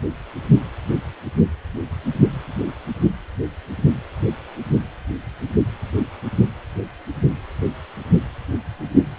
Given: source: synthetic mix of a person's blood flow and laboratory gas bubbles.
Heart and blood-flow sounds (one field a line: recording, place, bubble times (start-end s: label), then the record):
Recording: Doppler ultrasound of blood flow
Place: precordium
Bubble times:
no bubbles
From the record:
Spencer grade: 0 (complete lack of bubble signals)